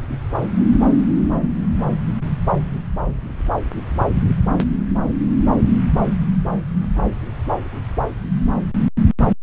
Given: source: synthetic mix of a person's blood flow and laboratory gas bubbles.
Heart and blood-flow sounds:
Doppler ultrasound of blood flow; subclavian vein
no bubbles
From the record:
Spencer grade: 0 (complete lack of bubble signals)

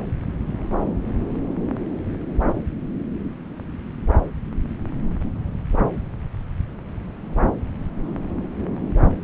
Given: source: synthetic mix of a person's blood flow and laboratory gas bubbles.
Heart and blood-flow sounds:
Doppler ultrasound of blood flow; subclavian vein
no bubbles
From the record:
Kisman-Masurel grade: 000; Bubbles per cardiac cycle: 0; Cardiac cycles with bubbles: 0%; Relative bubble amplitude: no bubbles discernible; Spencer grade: 0 (complete lack of bubble signals)

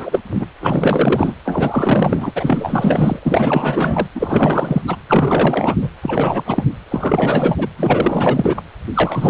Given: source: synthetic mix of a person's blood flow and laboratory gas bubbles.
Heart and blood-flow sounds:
Doppler ultrasound of blood flow; precordium
0.00-0.22 s: bubbles
0.30-0.47 s: bubbles
0.60-1.33 s: bubbles
1.45-2.32 s: bubbles
2.36-4.08 s: bubbles
4.15-4.82 s: bubbles
4.87-4.96 s: bubbles
5.08-5.75 s: bubbles
5.81-5.89 s: bubbles
6.03-6.64 s: bubbles
6.91-7.68 s: bubbles
7.77-8.62 s: bubbles
8.95-9.30 s: bubbles
From the record:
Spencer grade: 4 (maximum detectable bubble signal sounding continuously throughout systole and diastole of every cardiac period, and overriding the amplitude of the normal cardiac signals); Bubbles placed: anywhere in the cardiac cycle

